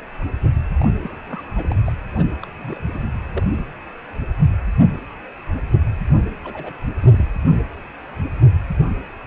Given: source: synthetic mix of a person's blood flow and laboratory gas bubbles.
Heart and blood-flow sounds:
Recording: Doppler ultrasound of blood flow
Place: precordium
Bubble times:
0.81-0.86 s: bubbles
1.03-1.19 s: bubbles
1.27-1.44 s: bubbles
1.57-1.75 s: bubbles
1.85-1.93 s: bubbles
2.13-2.27 s: bubbles
2.42-2.46 s: bubbles
2.62-2.80 s: bubbles
2.93-3.10 s: bubbles
3.27-3.44 s: bubbles
6.09-6.16 s: bubbles
6.44-6.72 s: bubbles
6.99-7.28 s: bubbles
From the record:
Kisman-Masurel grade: 221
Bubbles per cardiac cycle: several, 3 to 8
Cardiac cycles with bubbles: 10 to 50%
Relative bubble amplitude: barely perceptible (0.100 to 0.250)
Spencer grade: 2 (many but less than half of the cardiac periods contain bubble signals, singularly or in groups)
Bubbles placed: anywhere in the cardiac cycle

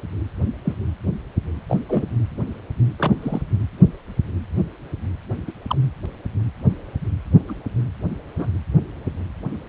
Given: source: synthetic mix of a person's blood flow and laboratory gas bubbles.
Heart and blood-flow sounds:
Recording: Doppler ultrasound of blood flow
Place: precordium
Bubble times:
0.65-0.73 s: bubbles
1.69-1.77 s: bubbles
1.87-2.04 s: bubbles
2.99-3.15 s: bubbles
3.22-3.42 s: bubbles
5.47-5.52 s: bubbles
5.67-5.76 s: bubbles
7.48-7.56 s: bubbles
8.37-8.46 s: bubbles
From the record:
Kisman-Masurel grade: 122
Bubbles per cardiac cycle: 1 to 2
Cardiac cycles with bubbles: 10 to 50%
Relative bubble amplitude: moderate (0.250 to 0.450)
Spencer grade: 2 (many but less than half of the cardiac periods contain bubble signals, singularly or in groups)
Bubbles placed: anywhere in the cardiac cycle

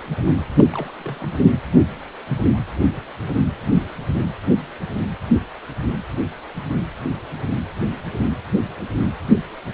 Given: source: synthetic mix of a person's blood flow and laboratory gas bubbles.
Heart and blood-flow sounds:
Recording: Doppler ultrasound of blood flow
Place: precordium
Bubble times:
0.59-0.62 s: bubbles
0.70-0.91 s: bubbles
0.99-1.51 s: bubbles
From the record:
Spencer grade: 1 (occasional bubble signal discernible with the cardiac motion signal, with majority of cardiac periods free of bubbles)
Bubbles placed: anywhere in the cardiac cycle

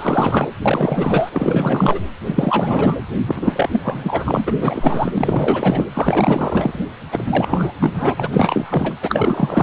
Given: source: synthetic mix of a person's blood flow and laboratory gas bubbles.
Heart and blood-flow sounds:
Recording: Doppler ultrasound of blood flow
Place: precordium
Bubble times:
0.00-0.48 s: bubbles
0.63-2.00 s: bubbles
2.25-2.96 s: bubbles
3.27-4.52 s: bubbles
4.60-5.85 s: bubbles
5.94-6.79 s: bubbles
7.11-7.74 s: bubbles
7.79-8.95 s: bubbles
9.02-9.63 s: bubbles
From the record:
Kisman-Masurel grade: 444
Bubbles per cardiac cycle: continuous sound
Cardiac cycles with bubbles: 100%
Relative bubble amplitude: maximal (0.775 to 0.999)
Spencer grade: 4 (maximum detectable bubble signal sounding continuously throughout systole and diastole of every cardiac period, and overriding the amplitude of the normal cardiac signals)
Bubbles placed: anywhere in the cardiac cycle

